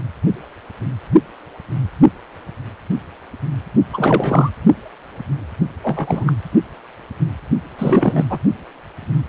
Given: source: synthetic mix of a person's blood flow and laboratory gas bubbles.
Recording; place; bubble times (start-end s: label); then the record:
Doppler ultrasound of blood flow; precordium
3.93-4.50 s: bubbles
5.83-6.33 s: bubbles
7.78-8.24 s: bubbles
8.29-8.38 s: bubbles
From the record:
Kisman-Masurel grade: 223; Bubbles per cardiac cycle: several, 3 to 8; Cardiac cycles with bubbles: 10 to 50%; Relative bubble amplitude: loud (0.450 to 0.775); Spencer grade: 2 (many but less than half of the cardiac periods contain bubble signals, singularly or in groups); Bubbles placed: only in the low amplitude regions of the cardiac cycle